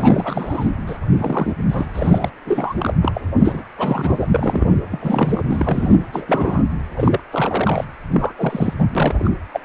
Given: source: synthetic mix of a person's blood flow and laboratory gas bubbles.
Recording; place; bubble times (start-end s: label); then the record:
Doppler ultrasound of blood flow; precordium
0.00-0.70 s: bubbles
0.86-0.98 s: bubbles
1.09-1.53 s: bubbles
1.69-1.87 s: bubbles
1.93-2.30 s: bubbles
2.45-2.74 s: bubbles
2.78-2.93 s: bubbles
3.02-3.21 s: bubbles
3.38-3.62 s: bubbles
3.76-4.28 s: bubbles
4.34-4.76 s: bubbles
4.91-5.42 s: bubbles
5.48-5.96 s: bubbles
6.12-6.63 s: bubbles
6.96-7.20 s: bubbles
7.31-7.84 s: bubbles
8.10-8.32 s: bubbles
8.37-8.73 s: bubbles
8.79-8.87 s: bubbles
8.95-9.30 s: bubbles
9.51-9.60 s: bubbles
9.62-9.65 s: bubbles
From the record:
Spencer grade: 3 (all of the cardiac periods contain showers or single bubble signals, but not dominating or overriding the cardiac motion signals); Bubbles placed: anywhere in the cardiac cycle